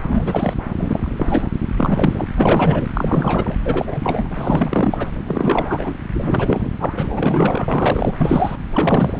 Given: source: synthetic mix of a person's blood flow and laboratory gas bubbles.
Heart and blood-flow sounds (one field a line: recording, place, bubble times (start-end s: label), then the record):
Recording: Doppler ultrasound of blood flow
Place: subclavian vein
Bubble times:
0.08-0.54 s: bubbles
0.78-1.48 s: bubbles
1.61-1.66 s: bubbles
1.76-2.25 s: bubbles
2.37-2.87 s: bubbles
2.94-3.56 s: bubbles
3.64-4.30 s: bubbles
4.36-5.08 s: bubbles
5.26-5.93 s: bubbles
6.12-6.71 s: bubbles
6.79-6.92 s: bubbles
6.96-8.12 s: bubbles
8.17-8.57 s: bubbles
8.71-9.20 s: bubbles
From the record:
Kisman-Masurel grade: 342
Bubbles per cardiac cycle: rolling drumbeat, 9 or more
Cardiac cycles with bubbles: 100%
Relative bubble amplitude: moderate (0.250 to 0.450)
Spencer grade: 3 (all of the cardiac periods contain showers or single bubble signals, but not dominating or overriding the cardiac motion signals)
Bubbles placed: anywhere in the cardiac cycle